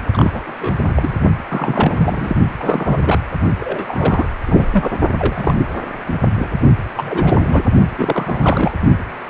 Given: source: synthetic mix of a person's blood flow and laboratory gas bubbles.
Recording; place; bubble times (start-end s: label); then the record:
Doppler ultrasound of blood flow; precordium
0.14-0.31 s: bubbles
0.33-0.42 s: bubbles
0.45-0.74 s: bubbles
0.85-1.13 s: bubbles
1.48-2.35 s: bubbles
2.60-3.20 s: bubbles
3.59-4.26 s: bubbles
4.46-4.70 s: bubbles
4.72-4.95 s: bubbles
5.17-5.66 s: bubbles
5.76-5.81 s: bubbles
6.07-6.17 s: bubbles
6.38-6.50 s: bubbles
6.96-7.62 s: bubbles
7.97-8.74 s: bubbles
From the record:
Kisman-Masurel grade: 332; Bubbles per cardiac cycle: rolling drumbeat, 9 or more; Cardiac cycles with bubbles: 50 to 99%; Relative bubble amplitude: moderate (0.250 to 0.450); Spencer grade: 3 (all of the cardiac periods contain showers or single bubble signals, but not dominating or overriding the cardiac motion signals); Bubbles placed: only in the low amplitude regions of the cardiac cycle